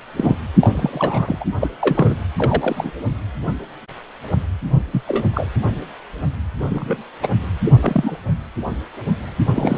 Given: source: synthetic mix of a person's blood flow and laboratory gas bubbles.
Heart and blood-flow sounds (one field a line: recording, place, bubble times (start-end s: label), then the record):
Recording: Doppler ultrasound of blood flow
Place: precordium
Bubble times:
0.17-0.37 s: bubbles
0.53-1.44 s: bubbles
1.60-1.69 s: bubbles
1.80-2.16 s: bubbles
2.38-2.99 s: bubbles
4.92-5.02 s: bubbles
5.07-5.25 s: bubbles
5.33-5.48 s: bubbles
6.60-7.03 s: bubbles
7.22-7.29 s: bubbles
7.65-7.72 s: bubbles
7.82-8.19 s: bubbles
9.48-9.78 s: bubbles
From the record:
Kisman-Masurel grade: 232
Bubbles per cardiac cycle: several, 3 to 8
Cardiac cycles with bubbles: 50 to 99%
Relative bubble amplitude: moderate (0.250 to 0.450)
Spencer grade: 3 (all of the cardiac periods contain showers or single bubble signals, but not dominating or overriding the cardiac motion signals)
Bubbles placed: anywhere in the cardiac cycle